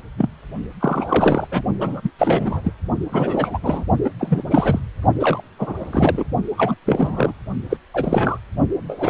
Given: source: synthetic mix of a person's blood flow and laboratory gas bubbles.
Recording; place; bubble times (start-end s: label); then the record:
Doppler ultrasound of blood flow; precordium
0.17-0.30 s: bubbles
0.80-1.47 s: bubbles
1.51-1.61 s: bubbles
1.80-2.11 s: bubbles
2.18-2.61 s: bubbles
2.64-2.72 s: bubbles
3.12-3.58 s: bubbles
3.62-3.84 s: bubbles
4.04-4.11 s: bubbles
4.18-4.42 s: bubbles
4.50-4.79 s: bubbles
5.19-5.42 s: bubbles
5.58-5.73 s: bubbles
5.76-6.23 s: bubbles
6.56-6.75 s: bubbles
6.86-7.33 s: bubbles
7.70-7.77 s: bubbles
7.94-8.39 s: bubbles
8.87-9.10 s: bubbles
From the record:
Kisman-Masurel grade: 343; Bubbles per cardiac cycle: rolling drumbeat, 9 or more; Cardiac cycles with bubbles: 100%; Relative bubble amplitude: loud (0.450 to 0.775); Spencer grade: 3 (all of the cardiac periods contain showers or single bubble signals, but not dominating or overriding the cardiac motion signals); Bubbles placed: only in the low amplitude regions of the cardiac cycle